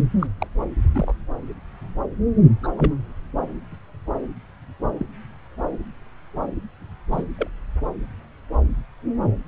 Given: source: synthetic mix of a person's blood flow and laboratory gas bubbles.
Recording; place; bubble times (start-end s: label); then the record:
Doppler ultrasound of blood flow; subclavian vein
0.19-0.27 s: bubbles
0.40-0.47 s: bubbles
0.94-1.14 s: bubbles
2.63-2.67 s: bubbles
2.77-2.92 s: bubbles
4.99-5.06 s: bubbles
7.11-7.24 s: bubbles
7.39-7.50 s: bubbles
From the record:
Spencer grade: 2 (many but less than half of the cardiac periods contain bubble signals, singularly or in groups); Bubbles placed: anywhere in the cardiac cycle